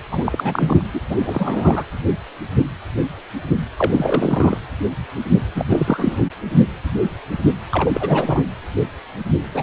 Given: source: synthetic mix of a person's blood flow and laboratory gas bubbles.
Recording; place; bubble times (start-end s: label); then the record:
Doppler ultrasound of blood flow; precordium
0.09-0.88 s: bubbles
0.93-1.00 s: bubbles
1.09-1.16 s: bubbles
1.19-1.84 s: bubbles
3.78-4.58 s: bubbles
5.54-5.65 s: bubbles
5.68-6.24 s: bubbles
7.71-8.42 s: bubbles
9.54-9.63 s: bubbles
From the record:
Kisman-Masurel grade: 332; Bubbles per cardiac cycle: rolling drumbeat, 9 or more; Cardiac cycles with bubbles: 50 to 99%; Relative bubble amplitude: moderate (0.250 to 0.450); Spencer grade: 3 (all of the cardiac periods contain showers or single bubble signals, but not dominating or overriding the cardiac motion signals); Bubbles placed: anywhere in the cardiac cycle